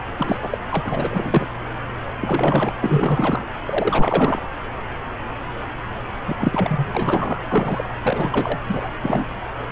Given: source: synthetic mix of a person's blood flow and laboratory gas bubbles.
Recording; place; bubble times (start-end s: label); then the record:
Doppler ultrasound of blood flow; subclavian vein
0.17-0.38 s: bubbles
0.42-0.58 s: bubbles
0.69-1.48 s: bubbles
2.22-2.73 s: bubbles
2.81-3.44 s: bubbles
3.66-4.42 s: bubbles
6.28-7.38 s: bubbles
7.48-7.90 s: bubbles
8.03-8.59 s: bubbles
8.68-8.97 s: bubbles
9.02-9.26 s: bubbles
From the record:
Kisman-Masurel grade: 332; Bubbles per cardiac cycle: rolling drumbeat, 9 or more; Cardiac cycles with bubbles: 50 to 99%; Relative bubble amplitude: moderate (0.250 to 0.450); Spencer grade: 3 (all of the cardiac periods contain showers or single bubble signals, but not dominating or overriding the cardiac motion signals); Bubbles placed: anywhere in the cardiac cycle